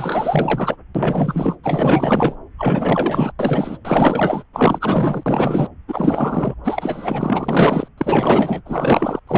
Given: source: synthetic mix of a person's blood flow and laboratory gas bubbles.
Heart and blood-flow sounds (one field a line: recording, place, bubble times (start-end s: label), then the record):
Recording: Doppler ultrasound of blood flow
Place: subclavian vein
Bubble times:
0.00-0.76 s: bubbles
0.95-1.56 s: bubbles
1.63-2.36 s: bubbles
2.58-3.32 s: bubbles
3.39-3.78 s: bubbles
3.85-4.44 s: bubbles
4.53-5.23 s: bubbles
5.26-5.68 s: bubbles
5.88-6.54 s: bubbles
6.63-7.88 s: bubbles
7.97-8.62 s: bubbles
8.65-9.20 s: bubbles
9.27-9.38 s: bubbles
From the record:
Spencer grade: 4 (maximum detectable bubble signal sounding continuously throughout systole and diastole of every cardiac period, and overriding the amplitude of the normal cardiac signals)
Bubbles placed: anywhere in the cardiac cycle